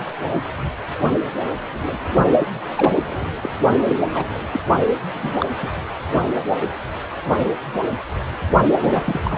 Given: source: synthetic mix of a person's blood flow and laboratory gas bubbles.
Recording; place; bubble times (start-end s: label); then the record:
Doppler ultrasound of blood flow; precordium
2.39-2.48 s: bubbles
2.75-2.93 s: bubbles
3.43-3.52 s: bubbles
3.87-3.96 s: bubbles
4.14-4.26 s: bubbles
4.35-4.39 s: bubbles
4.51-4.60 s: bubbles
5.13-5.35 s: bubbles
5.40-5.46 s: bubbles
5.62-5.69 s: bubbles
8.81-9.02 s: bubbles
9.05-9.21 s: bubbles
9.24-9.38 s: bubbles
From the record:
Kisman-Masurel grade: 232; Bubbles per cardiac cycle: several, 3 to 8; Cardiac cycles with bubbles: 50 to 99%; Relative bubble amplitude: moderate (0.250 to 0.450); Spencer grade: 3 (all of the cardiac periods contain showers or single bubble signals, but not dominating or overriding the cardiac motion signals); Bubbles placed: only in the low amplitude regions of the cardiac cycle